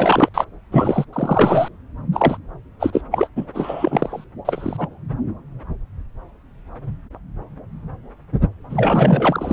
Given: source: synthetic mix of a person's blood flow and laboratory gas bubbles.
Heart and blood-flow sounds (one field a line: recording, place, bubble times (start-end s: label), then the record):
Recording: Doppler ultrasound of blood flow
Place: subclavian vein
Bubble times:
0.00-0.29 s: bubbles
0.34-0.45 s: bubbles
0.72-1.04 s: bubbles
1.12-1.68 s: bubbles
2.12-2.38 s: bubbles
2.79-3.01 s: bubbles
3.11-3.28 s: bubbles
3.36-3.46 s: bubbles
3.54-4.25 s: bubbles
4.45-4.88 s: bubbles
8.70-9.52 s: bubbles
From the record:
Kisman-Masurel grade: 333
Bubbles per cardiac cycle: rolling drumbeat, 9 or more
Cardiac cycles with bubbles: 50 to 99%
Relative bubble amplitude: loud (0.450 to 0.775)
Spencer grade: 3 (all of the cardiac periods contain showers or single bubble signals, but not dominating or overriding the cardiac motion signals)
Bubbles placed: anywhere in the cardiac cycle